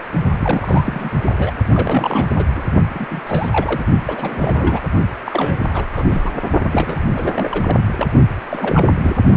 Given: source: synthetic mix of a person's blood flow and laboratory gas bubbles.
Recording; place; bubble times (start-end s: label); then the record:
Doppler ultrasound of blood flow; precordium
0.40-1.10 s: bubbles
1.22-1.54 s: bubbles
1.67-2.27 s: bubbles
2.36-2.45 s: bubbles
2.55-2.64 s: bubbles
2.94-3.06 s: bubbles
3.10-3.21 s: bubbles
3.27-3.85 s: bubbles
4.07-4.81 s: bubbles
5.26-5.86 s: bubbles
5.92-6.04 s: bubbles
6.10-6.31 s: bubbles
6.71-7.00 s: bubbles
7.12-7.78 s: bubbles
7.96-8.07 s: bubbles
8.50-8.94 s: bubbles
8.99-9.16 s: bubbles
From the record:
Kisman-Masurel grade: 342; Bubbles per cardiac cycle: rolling drumbeat, 9 or more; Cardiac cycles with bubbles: 100%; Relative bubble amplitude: moderate (0.250 to 0.450); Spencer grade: 3 (all of the cardiac periods contain showers or single bubble signals, but not dominating or overriding the cardiac motion signals); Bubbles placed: only in the low amplitude regions of the cardiac cycle